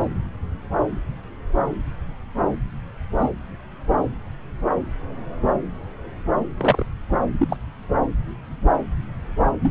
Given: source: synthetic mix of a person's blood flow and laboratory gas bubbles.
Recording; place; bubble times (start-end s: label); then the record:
Doppler ultrasound of blood flow; subclavian vein
3.18-3.30 s: bubbles
6.57-6.86 s: bubbles
7.39-7.57 s: bubbles
9.63-9.71 s: bubbles
From the record:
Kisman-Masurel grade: 122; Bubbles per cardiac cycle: 1 to 2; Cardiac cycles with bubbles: 10 to 50%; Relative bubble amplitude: moderate (0.250 to 0.450); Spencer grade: 2 (many but less than half of the cardiac periods contain bubble signals, singularly or in groups); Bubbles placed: anywhere in the cardiac cycle